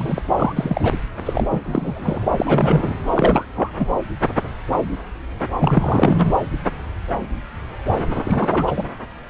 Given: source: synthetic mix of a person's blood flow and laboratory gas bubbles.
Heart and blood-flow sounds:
Doppler ultrasound of blood flow; subclavian vein
0.00-0.22 s: bubbles
0.36-0.53 s: bubbles
0.55-0.93 s: bubbles
1.25-1.48 s: bubbles
1.51-1.60 s: bubbles
1.64-2.18 s: bubbles
2.31-2.95 s: bubbles
3.07-3.45 s: bubbles
3.55-3.70 s: bubbles
3.78-3.86 s: bubbles
5.59-6.23 s: bubbles
8.17-8.22 s: bubbles
8.25-8.84 s: bubbles
From the record:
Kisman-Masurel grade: 332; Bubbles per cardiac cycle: rolling drumbeat, 9 or more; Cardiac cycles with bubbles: 50 to 99%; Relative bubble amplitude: moderate (0.250 to 0.450); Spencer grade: 3 (all of the cardiac periods contain showers or single bubble signals, but not dominating or overriding the cardiac motion signals); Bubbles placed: anywhere in the cardiac cycle

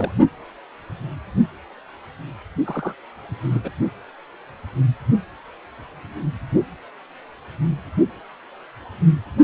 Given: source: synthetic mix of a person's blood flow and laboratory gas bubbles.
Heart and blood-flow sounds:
Doppler ultrasound of blood flow; precordium
0.00-0.11 s: bubbles
2.65-2.94 s: bubbles
3.44-3.60 s: bubbles
3.64-3.69 s: bubbles
From the record:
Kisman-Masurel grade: 221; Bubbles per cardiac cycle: several, 3 to 8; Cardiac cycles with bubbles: 10 to 50%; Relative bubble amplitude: barely perceptible (0.100 to 0.250); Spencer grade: 2 (many but less than half of the cardiac periods contain bubble signals, singularly or in groups); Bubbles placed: only in the low amplitude regions of the cardiac cycle

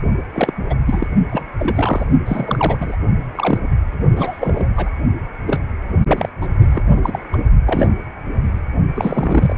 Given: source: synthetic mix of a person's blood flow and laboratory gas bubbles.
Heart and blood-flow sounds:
Doppler ultrasound of blood flow; precordium
0.33-0.52 s: bubbles
0.69-0.74 s: bubbles
0.86-1.07 s: bubbles
1.31-1.44 s: bubbles
1.57-2.04 s: bubbles
2.25-2.96 s: bubbles
3.35-3.58 s: bubbles
3.62-3.77 s: bubbles
4.16-4.89 s: bubbles
5.46-5.61 s: bubbles
6.07-6.29 s: bubbles
6.41-6.47 s: bubbles
6.72-6.84 s: bubbles
6.96-7.19 s: bubbles
7.33-7.37 s: bubbles
7.66-7.87 s: bubbles
8.94-9.56 s: bubbles
From the record:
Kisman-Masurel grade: 232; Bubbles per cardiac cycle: several, 3 to 8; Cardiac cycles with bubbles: 50 to 99%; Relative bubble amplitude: moderate (0.250 to 0.450); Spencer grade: 3 (all of the cardiac periods contain showers or single bubble signals, but not dominating or overriding the cardiac motion signals); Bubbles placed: only in the low amplitude regions of the cardiac cycle

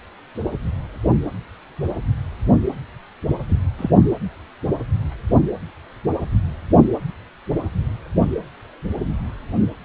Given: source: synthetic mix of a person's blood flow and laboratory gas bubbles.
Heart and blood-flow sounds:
Doppler ultrasound of blood flow; precordium
3.49-3.58 s: bubbles
3.77-3.90 s: bubbles
From the record:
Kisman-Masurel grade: 111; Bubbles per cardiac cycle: 1 to 2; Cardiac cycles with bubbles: 1 to 10%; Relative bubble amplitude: barely perceptible (0.100 to 0.250); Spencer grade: 1 (occasional bubble signal discernible with the cardiac motion signal, with majority of cardiac periods free of bubbles); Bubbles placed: anywhere in the cardiac cycle

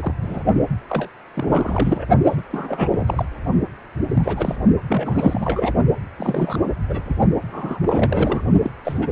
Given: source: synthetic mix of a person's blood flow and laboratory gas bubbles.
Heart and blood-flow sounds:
Doppler ultrasound of blood flow; precordium
0.00-0.14 s: bubbles
0.22-0.43 s: bubbles
0.89-1.08 s: bubbles
1.33-2.05 s: bubbles
2.27-2.42 s: bubbles
2.50-3.25 s: bubbles
4.12-4.56 s: bubbles
4.87-5.74 s: bubbles
6.18-6.58 s: bubbles
6.89-7.16 s: bubbles
7.48-8.46 s: bubbles
8.62-8.71 s: bubbles
8.84-8.99 s: bubbles
9.01-9.12 s: bubbles
From the record:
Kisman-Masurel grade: 342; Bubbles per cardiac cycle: rolling drumbeat, 9 or more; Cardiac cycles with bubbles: 100%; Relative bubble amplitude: moderate (0.250 to 0.450); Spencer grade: 3 (all of the cardiac periods contain showers or single bubble signals, but not dominating or overriding the cardiac motion signals); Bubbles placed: only in the low amplitude regions of the cardiac cycle

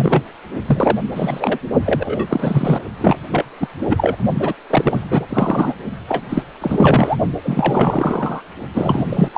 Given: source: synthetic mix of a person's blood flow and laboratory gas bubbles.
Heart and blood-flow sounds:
Doppler ultrasound of blood flow; precordium
0.00-0.22 s: bubbles
0.66-0.97 s: bubbles
1.11-1.58 s: bubbles
1.85-2.26 s: bubbles
2.29-2.82 s: bubbles
3.01-3.17 s: bubbles
3.31-3.45 s: bubbles
3.60-3.67 s: bubbles
3.90-4.17 s: bubbles
4.40-4.54 s: bubbles
4.70-5.26 s: bubbles
5.29-5.74 s: bubbles
6.08-6.24 s: bubbles
6.29-6.42 s: bubbles
6.61-7.16 s: bubbles
7.43-8.41 s: bubbles
8.74-9.29 s: bubbles
9.34-9.38 s: bubbles
From the record:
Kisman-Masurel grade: 343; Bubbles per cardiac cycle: rolling drumbeat, 9 or more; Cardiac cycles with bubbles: 100%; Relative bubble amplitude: loud (0.450 to 0.775); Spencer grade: 3 (all of the cardiac periods contain showers or single bubble signals, but not dominating or overriding the cardiac motion signals); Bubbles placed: only in the low amplitude regions of the cardiac cycle

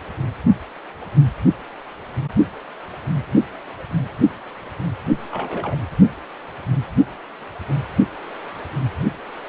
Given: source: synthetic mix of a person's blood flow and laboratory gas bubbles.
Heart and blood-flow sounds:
Doppler ultrasound of blood flow; precordium
5.31-5.76 s: bubbles
From the record:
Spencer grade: 2 (many but less than half of the cardiac periods contain bubble signals, singularly or in groups); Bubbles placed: only in the low amplitude regions of the cardiac cycle

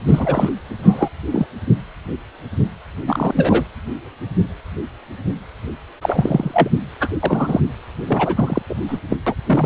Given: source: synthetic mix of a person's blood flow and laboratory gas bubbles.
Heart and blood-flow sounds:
Doppler ultrasound of blood flow; precordium
0.08-0.51 s: bubbles
0.82-1.09 s: bubbles
1.32-1.46 s: bubbles
3.07-3.33 s: bubbles
3.36-3.65 s: bubbles
6.02-6.69 s: bubbles
7.00-7.09 s: bubbles
7.23-7.61 s: bubbles
8.05-8.62 s: bubbles
8.69-8.75 s: bubbles
8.88-8.98 s: bubbles
9.10-9.17 s: bubbles
9.27-9.35 s: bubbles
9.46-9.65 s: bubbles
From the record:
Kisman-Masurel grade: 233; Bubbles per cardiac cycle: several, 3 to 8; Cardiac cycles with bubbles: 50 to 99%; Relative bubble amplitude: loud (0.450 to 0.775); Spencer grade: 3 (all of the cardiac periods contain showers or single bubble signals, but not dominating or overriding the cardiac motion signals); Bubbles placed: anywhere in the cardiac cycle

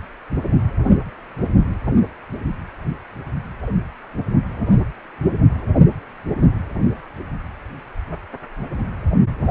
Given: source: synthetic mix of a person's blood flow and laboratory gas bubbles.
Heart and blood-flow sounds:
Doppler ultrasound of blood flow; precordium
no bubbles
From the record:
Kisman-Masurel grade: 000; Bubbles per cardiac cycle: 0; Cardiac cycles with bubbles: 0%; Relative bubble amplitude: no bubbles discernible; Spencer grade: 0 (complete lack of bubble signals)

